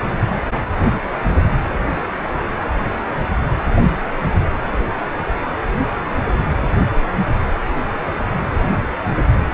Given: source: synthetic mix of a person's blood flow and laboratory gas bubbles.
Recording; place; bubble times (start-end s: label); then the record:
Doppler ultrasound of blood flow; precordium
8.61-8.78 s: bubbles
From the record:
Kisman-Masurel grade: 112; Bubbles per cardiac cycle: 1 to 2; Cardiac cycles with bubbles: 1 to 10%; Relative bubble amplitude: moderate (0.250 to 0.450); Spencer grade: 1 (occasional bubble signal discernible with the cardiac motion signal, with majority of cardiac periods free of bubbles); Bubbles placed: anywhere in the cardiac cycle